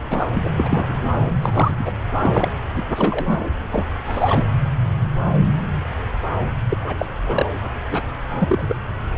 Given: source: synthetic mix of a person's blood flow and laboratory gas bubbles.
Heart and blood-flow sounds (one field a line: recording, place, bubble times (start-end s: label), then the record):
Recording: Doppler ultrasound of blood flow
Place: subclavian vein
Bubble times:
0.10-0.30 s: bubbles
0.34-0.48 s: bubbles
0.57-1.22 s: bubbles
1.42-1.75 s: bubbles
1.79-1.92 s: bubbles
2.17-2.58 s: bubbles
2.75-2.83 s: bubbles
2.96-3.50 s: bubbles
3.72-3.86 s: bubbles
4.05-4.45 s: bubbles
6.68-6.77 s: bubbles
6.82-7.05 s: bubbles
7.26-7.46 s: bubbles
7.91-8.02 s: bubbles
8.33-8.76 s: bubbles
From the record:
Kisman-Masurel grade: 232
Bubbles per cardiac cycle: several, 3 to 8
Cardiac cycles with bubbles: 50 to 99%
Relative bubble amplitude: moderate (0.250 to 0.450)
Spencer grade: 3 (all of the cardiac periods contain showers or single bubble signals, but not dominating or overriding the cardiac motion signals)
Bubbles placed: anywhere in the cardiac cycle